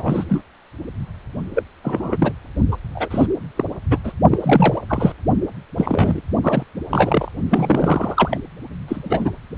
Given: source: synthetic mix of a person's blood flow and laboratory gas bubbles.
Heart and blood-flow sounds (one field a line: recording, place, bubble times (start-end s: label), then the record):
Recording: Doppler ultrasound of blood flow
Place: precordium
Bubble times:
0.00-0.24 s: bubbles
0.29-0.43 s: bubbles
1.54-1.63 s: bubbles
1.83-2.33 s: bubbles
2.71-2.77 s: bubbles
2.95-3.08 s: bubbles
3.10-3.26 s: bubbles
3.56-3.64 s: bubbles
3.91-3.98 s: bubbles
4.04-4.12 s: bubbles
4.30-4.79 s: bubbles
4.88-5.12 s: bubbles
5.78-6.21 s: bubbles
6.43-6.63 s: bubbles
6.90-7.32 s: bubbles
7.50-8.40 s: bubbles
8.88-9.31 s: bubbles
From the record:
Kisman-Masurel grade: 242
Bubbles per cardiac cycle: several, 3 to 8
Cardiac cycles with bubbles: 100%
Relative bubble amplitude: moderate (0.250 to 0.450)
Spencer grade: 3 (all of the cardiac periods contain showers or single bubble signals, but not dominating or overriding the cardiac motion signals)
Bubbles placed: only in the low amplitude regions of the cardiac cycle